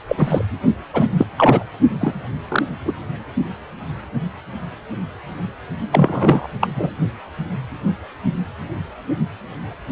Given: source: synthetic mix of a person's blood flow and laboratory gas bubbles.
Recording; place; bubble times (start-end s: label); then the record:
Doppler ultrasound of blood flow; precordium
0.08-0.45 s: bubbles
0.93-1.07 s: bubbles
1.18-1.25 s: bubbles
1.37-1.64 s: bubbles
2.01-2.16 s: bubbles
2.49-2.62 s: bubbles
2.86-2.94 s: bubbles
5.92-6.47 s: bubbles
6.61-6.67 s: bubbles
6.75-6.90 s: bubbles
From the record:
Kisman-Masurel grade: 223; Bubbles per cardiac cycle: several, 3 to 8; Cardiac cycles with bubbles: 10 to 50%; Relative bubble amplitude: loud (0.450 to 0.775); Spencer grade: 2 (many but less than half of the cardiac periods contain bubble signals, singularly or in groups); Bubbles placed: only in the low amplitude regions of the cardiac cycle